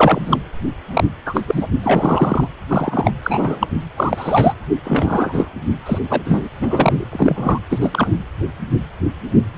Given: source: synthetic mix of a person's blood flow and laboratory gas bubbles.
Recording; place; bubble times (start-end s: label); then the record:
Doppler ultrasound of blood flow; precordium
0.00-0.22 s: bubbles
0.25-0.38 s: bubbles
0.93-1.04 s: bubbles
1.25-1.43 s: bubbles
1.47-1.67 s: bubbles
1.83-2.46 s: bubbles
2.67-3.12 s: bubbles
3.23-3.67 s: bubbles
3.97-4.53 s: bubbles
4.84-5.49 s: bubbles
5.86-5.99 s: bubbles
6.09-6.49 s: bubbles
6.62-7.07 s: bubbles
7.12-7.58 s: bubbles
7.70-8.18 s: bubbles
From the record:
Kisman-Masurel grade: 233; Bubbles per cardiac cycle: several, 3 to 8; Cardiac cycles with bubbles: 50 to 99%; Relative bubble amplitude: loud (0.450 to 0.775); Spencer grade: 3 (all of the cardiac periods contain showers or single bubble signals, but not dominating or overriding the cardiac motion signals); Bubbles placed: anywhere in the cardiac cycle